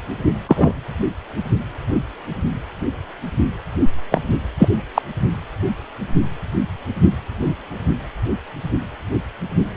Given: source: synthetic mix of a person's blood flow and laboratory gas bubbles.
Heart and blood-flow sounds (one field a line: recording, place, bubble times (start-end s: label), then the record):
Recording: Doppler ultrasound of blood flow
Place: precordium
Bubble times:
0.48-0.80 s: bubbles
4.11-4.21 s: bubbles
4.60-4.68 s: bubbles
4.94-5.02 s: bubbles
From the record:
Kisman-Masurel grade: 123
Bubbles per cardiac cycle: 1 to 2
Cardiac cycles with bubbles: 10 to 50%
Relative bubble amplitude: loud (0.450 to 0.775)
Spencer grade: 2 (many but less than half of the cardiac periods contain bubble signals, singularly or in groups)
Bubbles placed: anywhere in the cardiac cycle